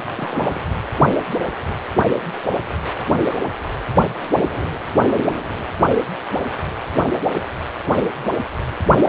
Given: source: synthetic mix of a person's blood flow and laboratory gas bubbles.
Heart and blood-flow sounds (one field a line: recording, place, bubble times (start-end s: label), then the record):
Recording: Doppler ultrasound of blood flow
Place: precordium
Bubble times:
0.15-0.64 s: bubbles
From the record:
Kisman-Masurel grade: 111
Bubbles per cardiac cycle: 1 to 2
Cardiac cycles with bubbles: 1 to 10%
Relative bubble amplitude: barely perceptible (0.100 to 0.250)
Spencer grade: 1 (occasional bubble signal discernible with the cardiac motion signal, with majority of cardiac periods free of bubbles)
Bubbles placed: anywhere in the cardiac cycle